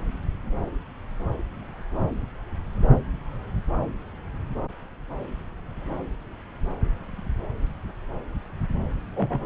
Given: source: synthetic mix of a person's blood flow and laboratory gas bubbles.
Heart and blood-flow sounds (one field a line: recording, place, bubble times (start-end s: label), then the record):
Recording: Doppler ultrasound of blood flow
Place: subclavian vein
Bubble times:
9.15-9.39 s: bubbles
From the record:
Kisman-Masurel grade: 121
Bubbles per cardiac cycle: 1 to 2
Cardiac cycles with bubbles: 10 to 50%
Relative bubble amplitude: barely perceptible (0.100 to 0.250)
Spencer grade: 2 (many but less than half of the cardiac periods contain bubble signals, singularly or in groups)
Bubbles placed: anywhere in the cardiac cycle